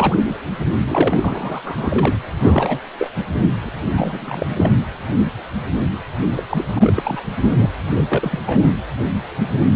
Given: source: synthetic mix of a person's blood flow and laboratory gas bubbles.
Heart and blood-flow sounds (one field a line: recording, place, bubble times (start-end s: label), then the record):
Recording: Doppler ultrasound of blood flow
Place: precordium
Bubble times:
0.00-0.17 s: bubbles
0.24-0.35 s: bubbles
0.86-1.61 s: bubbles
1.65-2.15 s: bubbles
2.39-2.79 s: bubbles
2.99-3.12 s: bubbles
3.17-3.25 s: bubbles
3.41-3.49 s: bubbles
3.60-3.70 s: bubbles
3.93-4.72 s: bubbles
6.36-6.45 s: bubbles
6.50-6.93 s: bubbles
6.96-7.21 s: bubbles
7.41-7.51 s: bubbles
7.58-7.66 s: bubbles
7.90-8.40 s: bubbles
8.46-8.74 s: bubbles
From the record:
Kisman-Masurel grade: 332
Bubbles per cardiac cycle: rolling drumbeat, 9 or more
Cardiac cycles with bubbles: 50 to 99%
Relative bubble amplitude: moderate (0.250 to 0.450)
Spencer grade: 3 (all of the cardiac periods contain showers or single bubble signals, but not dominating or overriding the cardiac motion signals)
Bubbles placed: anywhere in the cardiac cycle